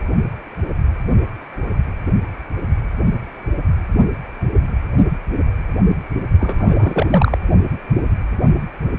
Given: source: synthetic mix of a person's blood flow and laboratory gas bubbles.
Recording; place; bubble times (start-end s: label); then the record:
Doppler ultrasound of blood flow; precordium
6.39-7.07 s: bubbles
7.10-7.38 s: bubbles
From the record:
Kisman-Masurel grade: 213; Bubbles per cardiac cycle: several, 3 to 8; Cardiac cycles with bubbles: 1 to 10%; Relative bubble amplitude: loud (0.450 to 0.775); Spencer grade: 1 (occasional bubble signal discernible with the cardiac motion signal, with majority of cardiac periods free of bubbles); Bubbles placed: only in the low amplitude regions of the cardiac cycle